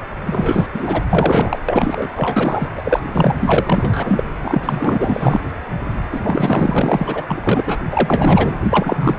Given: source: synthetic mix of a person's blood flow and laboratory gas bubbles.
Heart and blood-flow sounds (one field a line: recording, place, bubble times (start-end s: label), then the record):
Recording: Doppler ultrasound of blood flow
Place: precordium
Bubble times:
0.25-0.69 s: bubbles
0.74-1.03 s: bubbles
1.09-1.57 s: bubbles
1.69-2.08 s: bubbles
2.15-2.69 s: bubbles
2.77-3.00 s: bubbles
3.15-4.24 s: bubbles
4.42-5.39 s: bubbles
6.12-6.21 s: bubbles
6.24-7.22 s: bubbles
7.28-7.79 s: bubbles
7.92-8.55 s: bubbles
8.70-9.15 s: bubbles
From the record:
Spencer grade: 4 (maximum detectable bubble signal sounding continuously throughout systole and diastole of every cardiac period, and overriding the amplitude of the normal cardiac signals)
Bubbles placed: anywhere in the cardiac cycle